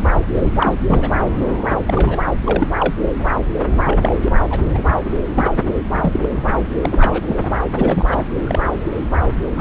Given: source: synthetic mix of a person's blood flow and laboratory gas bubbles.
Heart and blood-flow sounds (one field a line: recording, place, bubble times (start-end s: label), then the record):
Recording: Doppler ultrasound of blood flow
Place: subclavian vein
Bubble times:
0.34-0.52 s: bubbles
0.55-0.75 s: bubbles
0.86-1.12 s: bubbles
1.86-2.21 s: bubbles
2.26-2.33 s: bubbles
2.44-2.67 s: bubbles
2.79-2.94 s: bubbles
3.84-3.97 s: bubbles
4.01-4.16 s: bubbles
4.21-4.32 s: bubbles
4.50-4.56 s: bubbles
4.74-4.90 s: bubbles
5.04-5.11 s: bubbles
5.34-5.50 s: bubbles
5.91-6.29 s: bubbles
6.82-7.58 s: bubbles
7.75-8.25 s: bubbles
8.43-8.60 s: bubbles
9.55-9.61 s: bubbles
From the record:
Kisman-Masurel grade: 242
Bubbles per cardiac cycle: several, 3 to 8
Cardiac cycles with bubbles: 100%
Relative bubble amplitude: moderate (0.250 to 0.450)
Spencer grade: 3 (all of the cardiac periods contain showers or single bubble signals, but not dominating or overriding the cardiac motion signals)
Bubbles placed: anywhere in the cardiac cycle